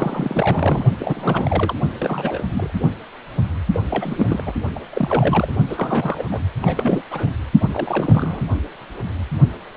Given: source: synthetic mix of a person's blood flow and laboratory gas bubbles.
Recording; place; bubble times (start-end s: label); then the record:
Doppler ultrasound of blood flow; precordium
0.00-0.86 s: bubbles
0.99-1.75 s: bubbles
2.00-2.49 s: bubbles
2.52-2.71 s: bubbles
3.73-3.80 s: bubbles
3.90-4.53 s: bubbles
4.75-4.79 s: bubbles
4.93-5.54 s: bubbles
5.68-6.41 s: bubbles
6.62-7.02 s: bubbles
7.10-7.29 s: bubbles
7.60-8.42 s: bubbles
From the record:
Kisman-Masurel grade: 332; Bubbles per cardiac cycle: rolling drumbeat, 9 or more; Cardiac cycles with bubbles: 50 to 99%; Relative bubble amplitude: moderate (0.250 to 0.450); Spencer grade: 3 (all of the cardiac periods contain showers or single bubble signals, but not dominating or overriding the cardiac motion signals); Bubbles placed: only in the low amplitude regions of the cardiac cycle